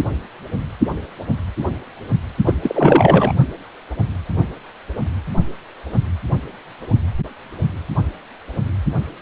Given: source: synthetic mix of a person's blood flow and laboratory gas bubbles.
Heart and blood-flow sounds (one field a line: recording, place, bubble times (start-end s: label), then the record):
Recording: Doppler ultrasound of blood flow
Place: precordium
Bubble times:
2.46-2.54 s: bubbles
2.62-3.33 s: bubbles
From the record:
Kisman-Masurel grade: 223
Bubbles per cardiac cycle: several, 3 to 8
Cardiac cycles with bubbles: 10 to 50%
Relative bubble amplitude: loud (0.450 to 0.775)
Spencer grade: 2 (many but less than half of the cardiac periods contain bubble signals, singularly or in groups)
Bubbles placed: only in the low amplitude regions of the cardiac cycle